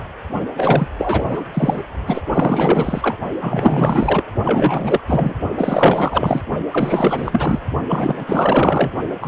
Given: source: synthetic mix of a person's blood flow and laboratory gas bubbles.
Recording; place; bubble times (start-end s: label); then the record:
Doppler ultrasound of blood flow; precordium
0.00-0.03 s: bubbles
0.56-0.88 s: bubbles
0.98-1.44 s: bubbles
1.53-1.82 s: bubbles
2.06-2.22 s: bubbles
2.33-3.17 s: bubbles
3.40-4.24 s: bubbles
4.44-5.01 s: bubbles
5.07-5.35 s: bubbles
5.58-6.43 s: bubbles
6.71-7.59 s: bubbles
7.89-8.90 s: bubbles
9.21-9.28 s: bubbles
From the record:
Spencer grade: 4 (maximum detectable bubble signal sounding continuously throughout systole and diastole of every cardiac period, and overriding the amplitude of the normal cardiac signals); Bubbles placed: only in the low amplitude regions of the cardiac cycle